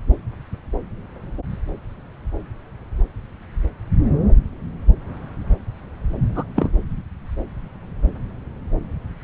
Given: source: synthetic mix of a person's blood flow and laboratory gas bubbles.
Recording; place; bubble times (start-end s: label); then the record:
Doppler ultrasound of blood flow; subclavian vein
6.34-6.43 s: bubbles
6.56-6.71 s: bubbles
From the record:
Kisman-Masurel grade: 112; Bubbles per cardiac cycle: 1 to 2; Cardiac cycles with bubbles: 1 to 10%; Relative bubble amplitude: moderate (0.250 to 0.450); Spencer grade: 1 (occasional bubble signal discernible with the cardiac motion signal, with majority of cardiac periods free of bubbles); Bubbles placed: anywhere in the cardiac cycle